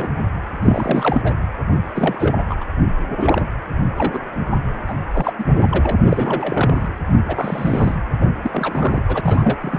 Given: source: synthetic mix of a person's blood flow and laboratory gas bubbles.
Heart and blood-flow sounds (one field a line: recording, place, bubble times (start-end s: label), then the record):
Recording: Doppler ultrasound of blood flow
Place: precordium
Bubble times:
0.00-0.09 s: bubbles
0.61-1.33 s: bubbles
1.95-2.57 s: bubbles
2.60-2.65 s: bubbles
3.21-3.42 s: bubbles
3.98-4.18 s: bubbles
4.87-4.94 s: bubbles
5.14-5.32 s: bubbles
5.38-5.46 s: bubbles
5.60-5.92 s: bubbles
6.04-6.86 s: bubbles
7.27-7.95 s: bubbles
8.21-8.30 s: bubbles
8.42-9.03 s: bubbles
9.07-9.79 s: bubbles
From the record:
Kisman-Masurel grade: 342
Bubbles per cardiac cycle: rolling drumbeat, 9 or more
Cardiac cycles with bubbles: 100%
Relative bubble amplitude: moderate (0.250 to 0.450)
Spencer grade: 3 (all of the cardiac periods contain showers or single bubble signals, but not dominating or overriding the cardiac motion signals)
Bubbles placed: anywhere in the cardiac cycle